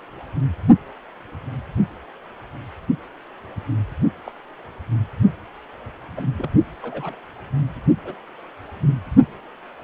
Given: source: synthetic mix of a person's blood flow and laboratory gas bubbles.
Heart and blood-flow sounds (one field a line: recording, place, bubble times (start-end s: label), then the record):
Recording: Doppler ultrasound of blood flow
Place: precordium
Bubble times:
4.26-4.32 s: bubbles
6.17-6.25 s: bubbles
6.37-6.50 s: bubbles
6.82-7.16 s: bubbles
8.04-8.14 s: bubbles
From the record:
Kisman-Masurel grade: 121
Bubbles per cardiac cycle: 1 to 2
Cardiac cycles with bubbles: 10 to 50%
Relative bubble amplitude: barely perceptible (0.100 to 0.250)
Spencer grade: 2 (many but less than half of the cardiac periods contain bubble signals, singularly or in groups)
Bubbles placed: only in the low amplitude regions of the cardiac cycle